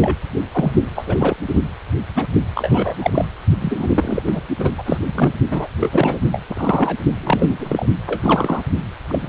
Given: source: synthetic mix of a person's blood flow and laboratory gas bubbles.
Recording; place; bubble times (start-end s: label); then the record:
Doppler ultrasound of blood flow; precordium
0.01-0.16 s: bubbles
0.52-0.72 s: bubbles
0.95-1.34 s: bubbles
1.48-1.62 s: bubbles
2.15-2.27 s: bubbles
2.55-3.25 s: bubbles
3.60-4.42 s: bubbles
4.58-4.71 s: bubbles
4.77-4.98 s: bubbles
5.14-5.32 s: bubbles
5.50-5.67 s: bubbles
5.80-6.19 s: bubbles
6.31-6.42 s: bubbles
6.47-6.97 s: bubbles
7.23-7.86 s: bubbles
8.06-8.62 s: bubbles
9.09-9.29 s: bubbles
From the record:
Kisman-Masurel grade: 243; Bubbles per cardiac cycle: several, 3 to 8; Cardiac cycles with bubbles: 100%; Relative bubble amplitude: loud (0.450 to 0.775); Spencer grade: 3 (all of the cardiac periods contain showers or single bubble signals, but not dominating or overriding the cardiac motion signals); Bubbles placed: only in the low amplitude regions of the cardiac cycle